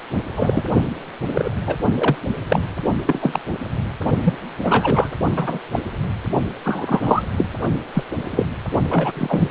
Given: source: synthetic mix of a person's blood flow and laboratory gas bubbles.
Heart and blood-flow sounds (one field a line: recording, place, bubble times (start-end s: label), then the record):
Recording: Doppler ultrasound of blood flow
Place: precordium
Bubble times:
0.36-0.65 s: bubbles
1.34-1.50 s: bubbles
1.67-1.75 s: bubbles
1.95-2.16 s: bubbles
2.50-2.62 s: bubbles
3.06-3.40 s: bubbles
4.25-4.34 s: bubbles
4.63-5.07 s: bubbles
5.36-5.59 s: bubbles
5.72-5.80 s: bubbles
6.64-7.23 s: bubbles
7.37-7.48 s: bubbles
7.93-8.03 s: bubbles
8.31-8.44 s: bubbles
8.90-9.12 s: bubbles
9.15-9.49 s: bubbles
From the record:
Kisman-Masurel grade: 243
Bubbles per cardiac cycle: several, 3 to 8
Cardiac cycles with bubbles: 100%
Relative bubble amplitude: loud (0.450 to 0.775)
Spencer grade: 3 (all of the cardiac periods contain showers or single bubble signals, but not dominating or overriding the cardiac motion signals)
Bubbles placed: only in the low amplitude regions of the cardiac cycle